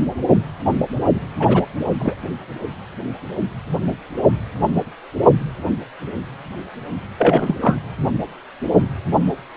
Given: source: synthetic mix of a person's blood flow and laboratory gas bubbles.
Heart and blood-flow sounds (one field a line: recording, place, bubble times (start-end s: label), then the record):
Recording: Doppler ultrasound of blood flow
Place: precordium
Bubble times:
1.40-1.66 s: bubbles
1.99-2.15 s: bubbles
7.18-7.56 s: bubbles
7.61-7.76 s: bubbles
From the record:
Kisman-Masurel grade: 223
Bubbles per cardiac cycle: several, 3 to 8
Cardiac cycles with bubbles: 10 to 50%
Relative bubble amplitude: loud (0.450 to 0.775)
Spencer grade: 2 (many but less than half of the cardiac periods contain bubble signals, singularly or in groups)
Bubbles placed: only in the low amplitude regions of the cardiac cycle